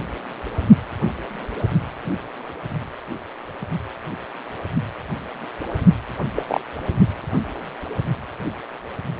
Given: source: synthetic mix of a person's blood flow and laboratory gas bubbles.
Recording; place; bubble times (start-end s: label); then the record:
Doppler ultrasound of blood flow; precordium
6.35-6.43 s: bubbles
6.47-6.60 s: bubbles
From the record:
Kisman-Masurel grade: 112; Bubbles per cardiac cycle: 1 to 2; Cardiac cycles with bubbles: 1 to 10%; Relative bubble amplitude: moderate (0.250 to 0.450); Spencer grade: 1 (occasional bubble signal discernible with the cardiac motion signal, with majority of cardiac periods free of bubbles); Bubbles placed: only in the low amplitude regions of the cardiac cycle